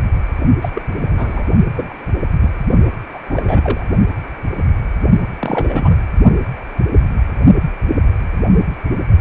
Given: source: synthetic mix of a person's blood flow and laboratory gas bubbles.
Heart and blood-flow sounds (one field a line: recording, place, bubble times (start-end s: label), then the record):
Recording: Doppler ultrasound of blood flow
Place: precordium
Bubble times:
0.61-0.69 s: bubbles
0.73-0.82 s: bubbles
0.87-1.44 s: bubbles
1.77-1.94 s: bubbles
2.40-2.50 s: bubbles
3.13-3.19 s: bubbles
3.27-3.87 s: bubbles
5.39-5.99 s: bubbles
From the record:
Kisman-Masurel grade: 232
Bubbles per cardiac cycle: several, 3 to 8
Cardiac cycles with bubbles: 50 to 99%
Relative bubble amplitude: moderate (0.250 to 0.450)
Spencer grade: 3 (all of the cardiac periods contain showers or single bubble signals, but not dominating or overriding the cardiac motion signals)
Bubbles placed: only in the low amplitude regions of the cardiac cycle